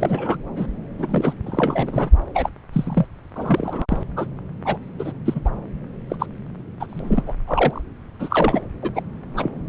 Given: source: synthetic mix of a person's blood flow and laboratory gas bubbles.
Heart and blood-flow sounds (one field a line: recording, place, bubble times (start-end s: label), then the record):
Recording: Doppler ultrasound of blood flow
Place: subclavian vein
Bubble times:
0.00-0.39 s: bubbles
0.56-0.67 s: bubbles
0.98-1.33 s: bubbles
1.46-2.10 s: bubbles
2.34-2.50 s: bubbles
2.73-3.06 s: bubbles
3.35-3.85 s: bubbles
3.88-3.98 s: bubbles
4.16-4.26 s: bubbles
4.65-4.78 s: bubbles
4.99-5.12 s: bubbles
5.25-5.41 s: bubbles
5.45-5.50 s: bubbles
6.10-6.16 s: bubbles
6.19-6.26 s: bubbles
6.80-7.23 s: bubbles
7.27-7.34 s: bubbles
7.47-7.81 s: bubbles
8.20-8.62 s: bubbles
8.81-8.90 s: bubbles
8.95-9.02 s: bubbles
9.37-9.51 s: bubbles
From the record:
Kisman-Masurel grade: 242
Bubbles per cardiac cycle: several, 3 to 8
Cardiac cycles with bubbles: 100%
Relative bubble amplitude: moderate (0.250 to 0.450)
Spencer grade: 3 (all of the cardiac periods contain showers or single bubble signals, but not dominating or overriding the cardiac motion signals)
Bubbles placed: anywhere in the cardiac cycle